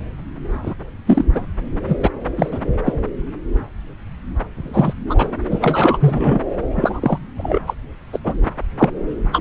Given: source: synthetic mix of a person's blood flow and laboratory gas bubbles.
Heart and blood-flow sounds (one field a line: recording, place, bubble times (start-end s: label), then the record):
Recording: Doppler ultrasound of blood flow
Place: subclavian vein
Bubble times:
0.62-0.74 s: bubbles
1.07-1.25 s: bubbles
1.34-1.46 s: bubbles
1.88-1.97 s: bubbles
2.02-2.09 s: bubbles
2.36-2.59 s: bubbles
2.85-2.95 s: bubbles
4.56-4.93 s: bubbles
5.09-5.29 s: bubbles
5.50-5.58 s: bubbles
5.61-6.40 s: bubbles
6.75-7.18 s: bubbles
7.37-7.59 s: bubbles
7.67-7.74 s: bubbles
8.12-8.19 s: bubbles
8.23-8.38 s: bubbles
8.79-8.89 s: bubbles
9.32-9.41 s: bubbles
From the record:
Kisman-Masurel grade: 233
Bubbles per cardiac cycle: several, 3 to 8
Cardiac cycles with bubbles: 50 to 99%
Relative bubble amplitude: loud (0.450 to 0.775)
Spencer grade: 3 (all of the cardiac periods contain showers or single bubble signals, but not dominating or overriding the cardiac motion signals)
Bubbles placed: anywhere in the cardiac cycle